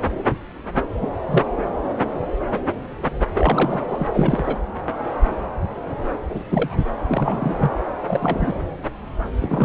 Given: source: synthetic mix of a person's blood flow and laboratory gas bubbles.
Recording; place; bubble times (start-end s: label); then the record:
Doppler ultrasound of blood flow; subclavian vein
1.01-1.07 s: bubbles
1.26-1.44 s: bubbles
3.33-3.85 s: bubbles
3.88-4.55 s: bubbles
6.29-6.43 s: bubbles
6.50-6.84 s: bubbles
7.08-7.56 s: bubbles
7.60-7.75 s: bubbles
8.07-8.58 s: bubbles
9.39-9.65 s: bubbles
From the record:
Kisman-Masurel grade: 222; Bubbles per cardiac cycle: several, 3 to 8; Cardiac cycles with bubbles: 10 to 50%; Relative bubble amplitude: moderate (0.250 to 0.450); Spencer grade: 2 (many but less than half of the cardiac periods contain bubble signals, singularly or in groups); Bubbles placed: anywhere in the cardiac cycle